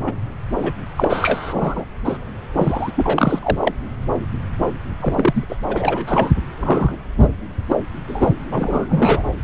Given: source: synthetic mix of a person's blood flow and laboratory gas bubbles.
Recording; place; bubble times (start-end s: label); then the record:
Doppler ultrasound of blood flow; subclavian vein
0.07-0.12 s: bubbles
0.55-0.72 s: bubbles
0.96-1.84 s: bubbles
2.04-2.17 s: bubbles
2.53-2.92 s: bubbles
2.97-3.40 s: bubbles
3.42-3.57 s: bubbles
3.60-3.72 s: bubbles
4.59-4.71 s: bubbles
5.00-5.45 s: bubbles
5.50-5.56 s: bubbles
5.68-6.31 s: bubbles
6.60-6.96 s: bubbles
7.18-7.28 s: bubbles
7.68-7.76 s: bubbles
8.07-8.29 s: bubbles
8.51-9.23 s: bubbles
From the record:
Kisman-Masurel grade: 242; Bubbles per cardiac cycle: several, 3 to 8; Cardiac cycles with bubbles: 100%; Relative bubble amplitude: moderate (0.250 to 0.450); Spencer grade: 3 (all of the cardiac periods contain showers or single bubble signals, but not dominating or overriding the cardiac motion signals); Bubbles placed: anywhere in the cardiac cycle